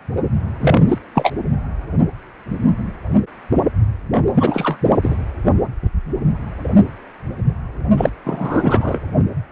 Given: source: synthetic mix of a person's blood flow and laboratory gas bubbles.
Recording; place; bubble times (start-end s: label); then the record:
Doppler ultrasound of blood flow; precordium
0.60-0.98 s: bubbles
1.15-1.34 s: bubbles
4.34-4.78 s: bubbles
4.83-4.98 s: bubbles
5.02-5.16 s: bubbles
7.96-8.11 s: bubbles
8.24-8.98 s: bubbles
From the record:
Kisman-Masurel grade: 223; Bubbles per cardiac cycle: several, 3 to 8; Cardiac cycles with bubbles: 10 to 50%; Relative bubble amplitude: loud (0.450 to 0.775); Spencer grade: 2 (many but less than half of the cardiac periods contain bubble signals, singularly or in groups); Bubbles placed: anywhere in the cardiac cycle